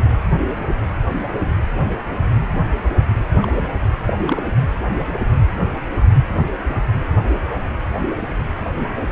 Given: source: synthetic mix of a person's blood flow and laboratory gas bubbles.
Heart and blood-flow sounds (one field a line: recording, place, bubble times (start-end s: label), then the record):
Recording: Doppler ultrasound of blood flow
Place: precordium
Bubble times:
3.42-3.68 s: bubbles
4.06-4.13 s: bubbles
4.27-4.41 s: bubbles
From the record:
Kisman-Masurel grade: 212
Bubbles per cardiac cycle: several, 3 to 8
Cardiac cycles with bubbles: 1 to 10%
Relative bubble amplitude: moderate (0.250 to 0.450)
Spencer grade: 1 (occasional bubble signal discernible with the cardiac motion signal, with majority of cardiac periods free of bubbles)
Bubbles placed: anywhere in the cardiac cycle